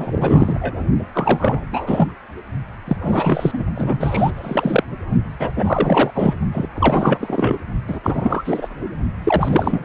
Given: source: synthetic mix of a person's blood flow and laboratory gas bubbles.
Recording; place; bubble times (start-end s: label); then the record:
Doppler ultrasound of blood flow; precordium
0.00-0.81 s: bubbles
1.14-1.60 s: bubbles
1.72-2.12 s: bubbles
2.88-2.97 s: bubbles
3.01-3.63 s: bubbles
3.75-4.31 s: bubbles
4.36-4.83 s: bubbles
5.39-5.50 s: bubbles
5.56-6.10 s: bubbles
6.14-6.34 s: bubbles
6.52-6.68 s: bubbles
6.75-7.58 s: bubbles
7.88-8.00 s: bubbles
8.03-8.68 s: bubbles
9.24-9.85 s: bubbles
From the record:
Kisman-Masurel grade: 343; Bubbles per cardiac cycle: rolling drumbeat, 9 or more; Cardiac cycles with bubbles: 100%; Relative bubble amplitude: loud (0.450 to 0.775); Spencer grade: 3 (all of the cardiac periods contain showers or single bubble signals, but not dominating or overriding the cardiac motion signals); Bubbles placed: only in the low amplitude regions of the cardiac cycle